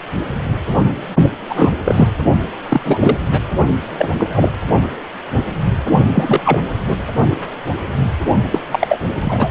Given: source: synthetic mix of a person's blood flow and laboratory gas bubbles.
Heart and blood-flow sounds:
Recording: Doppler ultrasound of blood flow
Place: precordium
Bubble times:
1.49-1.72 s: bubbles
1.85-2.08 s: bubbles
2.69-2.81 s: bubbles
2.85-3.17 s: bubbles
3.31-3.41 s: bubbles
3.97-4.08 s: bubbles
4.18-4.51 s: bubbles
6.14-6.62 s: bubbles
6.88-6.97 s: bubbles
8.51-8.60 s: bubbles
8.71-8.99 s: bubbles
9.20-9.49 s: bubbles
From the record:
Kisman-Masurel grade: 233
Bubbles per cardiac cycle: several, 3 to 8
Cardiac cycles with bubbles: 50 to 99%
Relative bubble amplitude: loud (0.450 to 0.775)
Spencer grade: 3 (all of the cardiac periods contain showers or single bubble signals, but not dominating or overriding the cardiac motion signals)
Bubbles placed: only in the low amplitude regions of the cardiac cycle

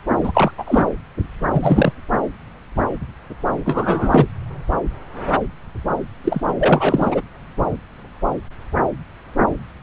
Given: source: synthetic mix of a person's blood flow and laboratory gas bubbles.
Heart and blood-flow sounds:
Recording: Doppler ultrasound of blood flow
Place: subclavian vein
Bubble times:
0.23-0.52 s: bubbles
0.57-0.89 s: bubbles
1.53-1.92 s: bubbles
3.65-4.26 s: bubbles
6.24-6.41 s: bubbles
6.48-6.53 s: bubbles
6.59-7.22 s: bubbles
From the record:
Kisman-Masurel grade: 223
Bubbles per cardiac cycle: several, 3 to 8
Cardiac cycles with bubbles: 10 to 50%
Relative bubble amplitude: loud (0.450 to 0.775)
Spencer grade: 2 (many but less than half of the cardiac periods contain bubble signals, singularly or in groups)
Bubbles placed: anywhere in the cardiac cycle

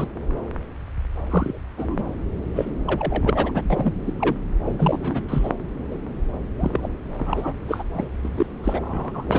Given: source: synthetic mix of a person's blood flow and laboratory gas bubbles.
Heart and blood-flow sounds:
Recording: Doppler ultrasound of blood flow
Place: subclavian vein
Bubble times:
0.00-0.08 s: bubbles
1.30-1.59 s: bubbles
1.77-2.04 s: bubbles
2.54-2.71 s: bubbles
2.85-3.62 s: bubbles
3.70-3.94 s: bubbles
4.06-4.13 s: bubbles
4.19-4.35 s: bubbles
4.64-5.22 s: bubbles
5.28-5.51 s: bubbles
5.90-5.96 s: bubbles
6.58-6.89 s: bubbles
7.17-7.53 s: bubbles
7.68-7.84 s: bubbles
7.94-8.07 s: bubbles
8.23-8.29 s: bubbles
8.37-8.46 s: bubbles
8.63-9.39 s: bubbles
From the record:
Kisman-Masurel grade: 233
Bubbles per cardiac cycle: several, 3 to 8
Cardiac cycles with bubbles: 50 to 99%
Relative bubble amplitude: loud (0.450 to 0.775)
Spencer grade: 3 (all of the cardiac periods contain showers or single bubble signals, but not dominating or overriding the cardiac motion signals)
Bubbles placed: anywhere in the cardiac cycle

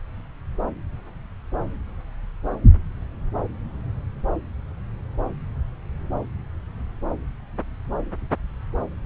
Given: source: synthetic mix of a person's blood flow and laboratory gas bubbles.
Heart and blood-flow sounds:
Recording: Doppler ultrasound of blood flow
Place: subclavian vein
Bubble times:
no bubbles
From the record:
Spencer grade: 0 (complete lack of bubble signals)

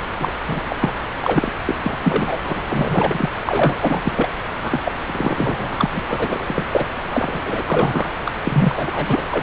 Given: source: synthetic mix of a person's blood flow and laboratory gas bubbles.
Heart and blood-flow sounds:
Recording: Doppler ultrasound of blood flow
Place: subclavian vein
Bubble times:
0.19-0.35 s: bubbles
0.47-0.60 s: bubbles
0.69-0.76 s: bubbles
0.79-0.93 s: bubbles
1.20-1.52 s: bubbles
1.64-1.75 s: bubbles
1.83-1.98 s: bubbles
2.03-2.39 s: bubbles
2.44-2.65 s: bubbles
2.71-3.29 s: bubbles
3.45-3.76 s: bubbles
3.81-4.02 s: bubbles
4.04-4.31 s: bubbles
4.64-4.82 s: bubbles
4.85-4.94 s: bubbles
5.07-5.87 s: bubbles
5.92-6.03 s: bubbles
6.08-6.67 s: bubbles
6.72-6.88 s: bubbles
7.10-7.64 s: bubbles
7.66-8.12 s: bubbles
8.24-8.31 s: bubbles
8.44-9.21 s: bubbles
9.30-9.43 s: bubbles
From the record:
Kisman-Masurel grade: 343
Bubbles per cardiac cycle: rolling drumbeat, 9 or more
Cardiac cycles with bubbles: 100%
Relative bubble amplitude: loud (0.450 to 0.775)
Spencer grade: 3 (all of the cardiac periods contain showers or single bubble signals, but not dominating or overriding the cardiac motion signals)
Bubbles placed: anywhere in the cardiac cycle

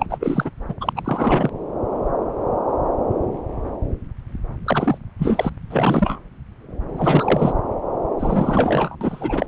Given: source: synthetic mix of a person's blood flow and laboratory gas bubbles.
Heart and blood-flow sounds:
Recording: Doppler ultrasound of blood flow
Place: subclavian vein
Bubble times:
0.00-0.06 s: bubbles
0.10-0.50 s: bubbles
0.68-0.74 s: bubbles
0.80-0.93 s: bubbles
0.95-1.50 s: bubbles
4.65-4.98 s: bubbles
5.18-5.50 s: bubbles
5.70-6.21 s: bubbles
6.97-7.53 s: bubbles
8.19-8.96 s: bubbles
9.01-9.46 s: bubbles
From the record:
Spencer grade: 3 (all of the cardiac periods contain showers or single bubble signals, but not dominating or overriding the cardiac motion signals)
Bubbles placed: anywhere in the cardiac cycle

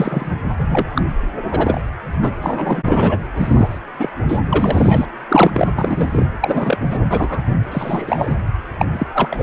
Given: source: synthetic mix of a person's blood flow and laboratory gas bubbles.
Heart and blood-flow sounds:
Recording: Doppler ultrasound of blood flow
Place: precordium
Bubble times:
0.00-0.31 s: bubbles
0.58-1.01 s: bubbles
1.51-1.81 s: bubbles
2.22-2.32 s: bubbles
2.42-3.19 s: bubbles
3.37-3.79 s: bubbles
3.99-4.09 s: bubbles
4.28-4.39 s: bubbles
4.48-5.05 s: bubbles
5.29-5.71 s: bubbles
5.75-6.25 s: bubbles
6.40-6.78 s: bubbles
6.90-6.98 s: bubbles
7.09-7.42 s: bubbles
7.71-8.37 s: bubbles
8.79-8.86 s: bubbles
8.93-9.43 s: bubbles
From the record:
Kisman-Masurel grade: 243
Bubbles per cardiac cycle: several, 3 to 8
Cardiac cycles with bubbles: 100%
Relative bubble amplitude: loud (0.450 to 0.775)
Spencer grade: 3 (all of the cardiac periods contain showers or single bubble signals, but not dominating or overriding the cardiac motion signals)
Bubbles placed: anywhere in the cardiac cycle

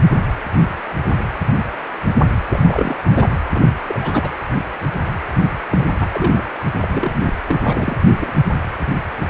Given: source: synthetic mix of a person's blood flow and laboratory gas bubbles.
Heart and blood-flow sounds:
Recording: Doppler ultrasound of blood flow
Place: precordium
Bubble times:
2.48-2.97 s: bubbles
3.10-3.29 s: bubbles
3.48-3.68 s: bubbles
3.83-4.30 s: bubbles
5.69-5.88 s: bubbles
5.98-6.44 s: bubbles
6.81-6.88 s: bubbles
6.92-7.33 s: bubbles
7.46-7.97 s: bubbles
8.12-8.32 s: bubbles
From the record:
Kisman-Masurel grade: 332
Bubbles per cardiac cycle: rolling drumbeat, 9 or more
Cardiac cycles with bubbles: 50 to 99%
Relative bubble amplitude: moderate (0.250 to 0.450)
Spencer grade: 3 (all of the cardiac periods contain showers or single bubble signals, but not dominating or overriding the cardiac motion signals)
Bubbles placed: anywhere in the cardiac cycle

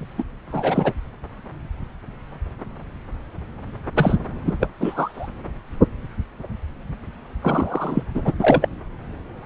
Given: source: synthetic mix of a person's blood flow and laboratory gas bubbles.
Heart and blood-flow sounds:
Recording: Doppler ultrasound of blood flow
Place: subclavian vein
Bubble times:
0.00-0.06 s: bubbles
0.18-0.23 s: bubbles
0.48-0.92 s: bubbles
3.95-4.18 s: bubbles
4.45-4.68 s: bubbles
4.80-5.28 s: bubbles
7.42-8.03 s: bubbles
8.14-8.22 s: bubbles
8.25-8.34 s: bubbles
8.38-8.69 s: bubbles
From the record:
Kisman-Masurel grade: 233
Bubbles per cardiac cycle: several, 3 to 8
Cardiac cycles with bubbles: 50 to 99%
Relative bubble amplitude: loud (0.450 to 0.775)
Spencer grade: 3 (all of the cardiac periods contain showers or single bubble signals, but not dominating or overriding the cardiac motion signals)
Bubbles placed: anywhere in the cardiac cycle

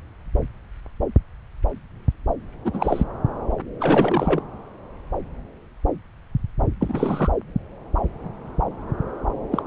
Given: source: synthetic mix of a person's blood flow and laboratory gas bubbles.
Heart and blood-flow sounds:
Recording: Doppler ultrasound of blood flow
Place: subclavian vein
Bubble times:
2.65-3.03 s: bubbles
3.81-4.43 s: bubbles
6.81-7.31 s: bubbles
9.51-9.62 s: bubbles
From the record:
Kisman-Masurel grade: 222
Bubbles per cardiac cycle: several, 3 to 8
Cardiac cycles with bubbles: 10 to 50%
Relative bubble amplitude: moderate (0.250 to 0.450)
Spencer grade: 2 (many but less than half of the cardiac periods contain bubble signals, singularly or in groups)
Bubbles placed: anywhere in the cardiac cycle

